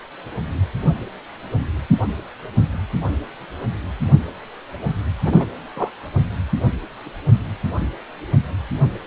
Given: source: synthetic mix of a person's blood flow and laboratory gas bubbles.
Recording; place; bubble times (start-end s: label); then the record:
Doppler ultrasound of blood flow; precordium
5.24-5.46 s: bubbles
5.76-5.91 s: bubbles
From the record:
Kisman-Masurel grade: 222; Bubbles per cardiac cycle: several, 3 to 8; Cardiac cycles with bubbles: 10 to 50%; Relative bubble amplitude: moderate (0.250 to 0.450); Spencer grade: 2 (many but less than half of the cardiac periods contain bubble signals, singularly or in groups); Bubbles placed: anywhere in the cardiac cycle